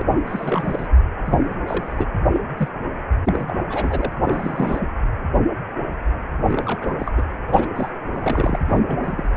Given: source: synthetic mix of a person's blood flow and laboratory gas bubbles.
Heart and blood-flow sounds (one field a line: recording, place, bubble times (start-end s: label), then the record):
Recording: Doppler ultrasound of blood flow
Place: precordium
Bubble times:
0.00-0.05 s: bubbles
0.10-0.19 s: bubbles
0.22-0.88 s: bubbles
1.25-1.54 s: bubbles
1.66-2.06 s: bubbles
2.33-2.41 s: bubbles
2.57-2.69 s: bubbles
3.25-3.56 s: bubbles
3.69-4.17 s: bubbles
4.22-4.87 s: bubbles
6.46-7.13 s: bubbles
7.16-7.23 s: bubbles
7.46-7.68 s: bubbles
7.75-7.90 s: bubbles
8.12-8.60 s: bubbles
8.68-8.83 s: bubbles
8.87-9.29 s: bubbles
From the record:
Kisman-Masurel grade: 332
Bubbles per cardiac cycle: rolling drumbeat, 9 or more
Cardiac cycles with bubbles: 50 to 99%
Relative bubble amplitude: moderate (0.250 to 0.450)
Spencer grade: 3 (all of the cardiac periods contain showers or single bubble signals, but not dominating or overriding the cardiac motion signals)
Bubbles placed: anywhere in the cardiac cycle